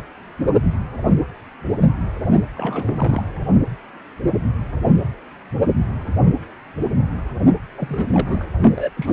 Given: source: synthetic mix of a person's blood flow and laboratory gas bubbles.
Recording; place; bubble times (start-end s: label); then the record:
Doppler ultrasound of blood flow; precordium
2.54-3.23 s: bubbles
7.77-8.04 s: bubbles
8.08-8.49 s: bubbles
8.61-8.72 s: bubbles
8.76-8.91 s: bubbles
8.96-9.13 s: bubbles
From the record:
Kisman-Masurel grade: 221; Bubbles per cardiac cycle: several, 3 to 8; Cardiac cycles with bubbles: 10 to 50%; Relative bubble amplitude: barely perceptible (0.100 to 0.250); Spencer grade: 2 (many but less than half of the cardiac periods contain bubble signals, singularly or in groups); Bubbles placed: only in the low amplitude regions of the cardiac cycle